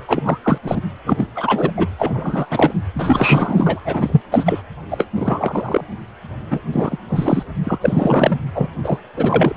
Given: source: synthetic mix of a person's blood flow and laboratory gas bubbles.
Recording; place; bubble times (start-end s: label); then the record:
Doppler ultrasound of blood flow; precordium
0.08-0.38 s: bubbles
0.42-0.58 s: bubbles
0.63-0.81 s: bubbles
1.06-1.28 s: bubbles
1.35-1.72 s: bubbles
1.76-1.87 s: bubbles
1.99-2.46 s: bubbles
2.50-2.73 s: bubbles
2.95-3.80 s: bubbles
3.84-4.22 s: bubbles
4.31-4.62 s: bubbles
4.91-5.07 s: bubbles
5.15-5.84 s: bubbles
6.50-6.60 s: bubbles
6.72-6.97 s: bubbles
7.09-7.43 s: bubbles
7.63-8.38 s: bubbles
8.54-8.70 s: bubbles
8.83-8.98 s: bubbles
9.16-9.56 s: bubbles
From the record:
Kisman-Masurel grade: 343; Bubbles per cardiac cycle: rolling drumbeat, 9 or more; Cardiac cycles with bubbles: 100%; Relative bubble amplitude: loud (0.450 to 0.775); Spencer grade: 3 (all of the cardiac periods contain showers or single bubble signals, but not dominating or overriding the cardiac motion signals); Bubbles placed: anywhere in the cardiac cycle